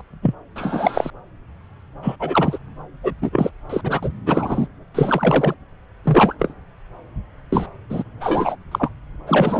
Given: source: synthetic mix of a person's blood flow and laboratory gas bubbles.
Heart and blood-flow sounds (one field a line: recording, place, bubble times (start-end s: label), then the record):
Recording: Doppler ultrasound of blood flow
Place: subclavian vein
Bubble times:
0.22-0.34 s: bubbles
0.56-1.10 s: bubbles
2.02-2.16 s: bubbles
2.20-2.58 s: bubbles
3.03-3.14 s: bubbles
3.22-3.50 s: bubbles
3.69-4.09 s: bubbles
4.25-4.67 s: bubbles
4.95-5.54 s: bubbles
6.04-6.35 s: bubbles
6.38-6.54 s: bubbles
7.52-7.69 s: bubbles
7.90-8.03 s: bubbles
8.21-8.56 s: bubbles
8.71-8.90 s: bubbles
9.27-9.60 s: bubbles
From the record:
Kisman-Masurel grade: 233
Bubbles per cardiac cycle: several, 3 to 8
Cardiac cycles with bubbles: 50 to 99%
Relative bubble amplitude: loud (0.450 to 0.775)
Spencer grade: 3 (all of the cardiac periods contain showers or single bubble signals, but not dominating or overriding the cardiac motion signals)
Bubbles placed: anywhere in the cardiac cycle